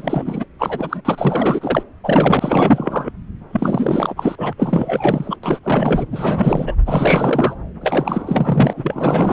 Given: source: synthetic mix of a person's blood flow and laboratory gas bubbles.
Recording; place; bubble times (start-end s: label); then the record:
Doppler ultrasound of blood flow; subclavian vein
0.00-0.46 s: bubbles
0.59-1.02 s: bubbles
1.04-1.83 s: bubbles
2.03-3.11 s: bubbles
3.52-4.36 s: bubbles
4.38-4.53 s: bubbles
4.57-5.37 s: bubbles
5.43-5.60 s: bubbles
5.63-6.06 s: bubbles
6.12-6.75 s: bubbles
6.86-7.56 s: bubbles
7.80-8.73 s: bubbles
8.77-9.32 s: bubbles
From the record:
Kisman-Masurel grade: 444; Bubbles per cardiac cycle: continuous sound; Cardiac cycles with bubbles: 100%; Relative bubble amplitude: maximal (0.775 to 0.999); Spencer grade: 4 (maximum detectable bubble signal sounding continuously throughout systole and diastole of every cardiac period, and overriding the amplitude of the normal cardiac signals); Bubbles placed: anywhere in the cardiac cycle